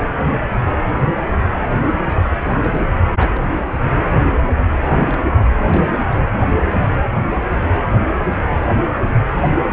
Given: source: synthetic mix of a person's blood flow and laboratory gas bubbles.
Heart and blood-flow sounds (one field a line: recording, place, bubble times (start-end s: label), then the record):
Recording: Doppler ultrasound of blood flow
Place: precordium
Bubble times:
2.06-2.18 s: bubbles
2.63-2.83 s: bubbles
2.89-2.98 s: bubbles
3.16-3.77 s: bubbles
4.60-5.21 s: bubbles
5.23-5.28 s: bubbles
5.55-5.64 s: bubbles
5.69-6.31 s: bubbles
8.21-8.25 s: bubbles
8.29-8.44 s: bubbles
8.60-8.71 s: bubbles
From the record:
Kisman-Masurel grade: 221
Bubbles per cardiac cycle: several, 3 to 8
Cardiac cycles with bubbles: 10 to 50%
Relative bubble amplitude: barely perceptible (0.100 to 0.250)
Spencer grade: 2 (many but less than half of the cardiac periods contain bubble signals, singularly or in groups)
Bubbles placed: only in the low amplitude regions of the cardiac cycle